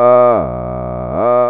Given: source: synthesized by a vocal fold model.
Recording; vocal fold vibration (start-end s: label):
sustained vowel that changes in the middle
0.00-0.29 s: 122.4 Hz, open quotient 0.20
0.49-1.09 s: 61.6 Hz, open quotient 0.33
1.29-1.50 s: 122.4 Hz, open quotient 0.20